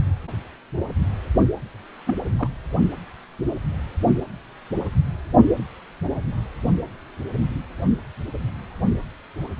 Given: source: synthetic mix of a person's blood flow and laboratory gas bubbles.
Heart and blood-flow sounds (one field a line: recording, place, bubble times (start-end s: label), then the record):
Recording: Doppler ultrasound of blood flow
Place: precordium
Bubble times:
2.06-2.15 s: bubbles
2.38-2.48 s: bubbles
From the record:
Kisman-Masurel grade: 112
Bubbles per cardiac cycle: 1 to 2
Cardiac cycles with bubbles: 1 to 10%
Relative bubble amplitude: moderate (0.250 to 0.450)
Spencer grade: 1 (occasional bubble signal discernible with the cardiac motion signal, with majority of cardiac periods free of bubbles)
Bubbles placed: only in the low amplitude regions of the cardiac cycle